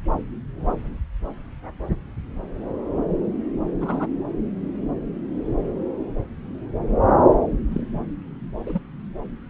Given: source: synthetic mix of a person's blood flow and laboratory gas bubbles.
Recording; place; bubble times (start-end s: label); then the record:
Doppler ultrasound of blood flow; subclavian vein
3.81-4.06 s: bubbles
7.71-7.83 s: bubbles
8.66-8.79 s: bubbles
From the record:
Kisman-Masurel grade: 122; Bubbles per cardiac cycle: 1 to 2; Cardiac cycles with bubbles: 10 to 50%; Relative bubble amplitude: moderate (0.250 to 0.450); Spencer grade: 2 (many but less than half of the cardiac periods contain bubble signals, singularly or in groups); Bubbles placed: anywhere in the cardiac cycle